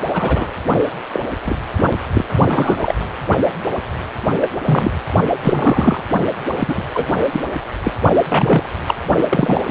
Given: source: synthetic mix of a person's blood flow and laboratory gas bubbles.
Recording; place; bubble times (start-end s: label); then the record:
Doppler ultrasound of blood flow; precordium
0.13-0.48 s: bubbles
1.12-1.20 s: bubbles
1.45-1.58 s: bubbles
2.13-2.25 s: bubbles
2.48-2.94 s: bubbles
4.41-4.50 s: bubbles
4.65-4.92 s: bubbles
5.42-6.03 s: bubbles
6.50-6.84 s: bubbles
6.93-7.06 s: bubbles
7.32-7.41 s: bubbles
7.84-7.91 s: bubbles
8.30-8.70 s: bubbles
8.87-8.95 s: bubbles
9.29-9.60 s: bubbles
9.66-9.70 s: bubbles
From the record:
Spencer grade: 3 (all of the cardiac periods contain showers or single bubble signals, but not dominating or overriding the cardiac motion signals); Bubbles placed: only in the low amplitude regions of the cardiac cycle